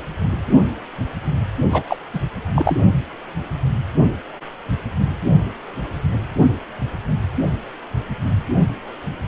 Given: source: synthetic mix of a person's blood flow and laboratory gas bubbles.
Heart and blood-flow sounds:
Doppler ultrasound of blood flow; precordium
1.71-1.84 s: bubbles
1.87-1.96 s: bubbles
2.13-2.20 s: bubbles
2.55-2.79 s: bubbles
From the record:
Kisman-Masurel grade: 213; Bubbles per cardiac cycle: several, 3 to 8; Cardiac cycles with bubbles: 1 to 10%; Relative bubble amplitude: loud (0.450 to 0.775); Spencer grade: 1 (occasional bubble signal discernible with the cardiac motion signal, with majority of cardiac periods free of bubbles); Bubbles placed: only in the low amplitude regions of the cardiac cycle

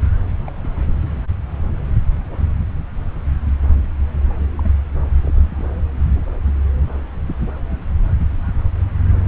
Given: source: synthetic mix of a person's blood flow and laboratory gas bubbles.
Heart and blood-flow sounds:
Doppler ultrasound of blood flow; subclavian vein
0.46-0.51 s: bubbles
0.62-0.68 s: bubbles
4.57-4.71 s: bubbles
5.21-5.64 s: bubbles
From the record:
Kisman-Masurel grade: 121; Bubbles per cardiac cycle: 1 to 2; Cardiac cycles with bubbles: 10 to 50%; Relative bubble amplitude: barely perceptible (0.100 to 0.250); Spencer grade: 2 (many but less than half of the cardiac periods contain bubble signals, singularly or in groups); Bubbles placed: anywhere in the cardiac cycle

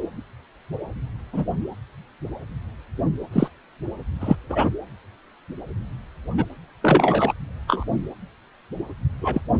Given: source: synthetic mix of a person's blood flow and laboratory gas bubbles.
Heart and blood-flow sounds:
Doppler ultrasound of blood flow; precordium
1.33-1.47 s: bubbles
3.32-3.48 s: bubbles
4.20-4.36 s: bubbles
4.49-4.70 s: bubbles
6.38-6.45 s: bubbles
6.83-7.33 s: bubbles
7.67-7.84 s: bubbles
9.21-9.42 s: bubbles
From the record:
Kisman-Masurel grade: 122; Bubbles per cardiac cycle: 1 to 2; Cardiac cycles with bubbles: 10 to 50%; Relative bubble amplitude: moderate (0.250 to 0.450); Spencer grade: 2 (many but less than half of the cardiac periods contain bubble signals, singularly or in groups); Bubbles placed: anywhere in the cardiac cycle

